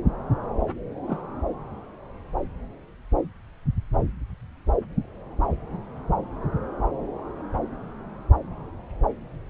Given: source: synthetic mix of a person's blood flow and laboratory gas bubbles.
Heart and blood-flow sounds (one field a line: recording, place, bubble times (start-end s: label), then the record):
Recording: Doppler ultrasound of blood flow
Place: subclavian vein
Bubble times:
1.08-1.24 s: bubbles
From the record:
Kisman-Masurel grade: 111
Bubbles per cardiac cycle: 1 to 2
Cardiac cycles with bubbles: 1 to 10%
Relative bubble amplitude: barely perceptible (0.100 to 0.250)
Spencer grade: 1 (occasional bubble signal discernible with the cardiac motion signal, with majority of cardiac periods free of bubbles)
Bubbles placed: anywhere in the cardiac cycle